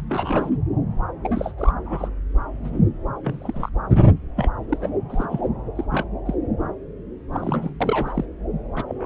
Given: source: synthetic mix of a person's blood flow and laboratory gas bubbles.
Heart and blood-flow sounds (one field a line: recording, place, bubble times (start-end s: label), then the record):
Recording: Doppler ultrasound of blood flow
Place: subclavian vein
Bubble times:
0.09-0.56 s: bubbles
1.23-1.52 s: bubbles
1.57-1.72 s: bubbles
1.85-2.10 s: bubbles
2.47-2.78 s: bubbles
3.22-3.69 s: bubbles
3.95-4.03 s: bubbles
4.36-4.49 s: bubbles
4.69-4.97 s: bubbles
5.10-5.49 s: bubbles
5.75-5.85 s: bubbles
5.91-6.04 s: bubbles
6.25-6.35 s: bubbles
7.32-7.76 s: bubbles
7.81-8.25 s: bubbles
8.75-8.84 s: bubbles
8.88-9.06 s: bubbles
From the record:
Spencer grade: 3 (all of the cardiac periods contain showers or single bubble signals, but not dominating or overriding the cardiac motion signals)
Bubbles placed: anywhere in the cardiac cycle